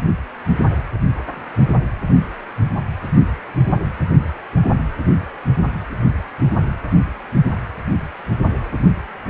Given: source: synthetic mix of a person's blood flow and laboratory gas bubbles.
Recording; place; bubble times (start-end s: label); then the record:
Doppler ultrasound of blood flow; precordium
no bubbles
From the record:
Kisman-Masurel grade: 000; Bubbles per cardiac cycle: 0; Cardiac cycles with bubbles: 0%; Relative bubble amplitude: no bubbles discernible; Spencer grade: 0 (complete lack of bubble signals)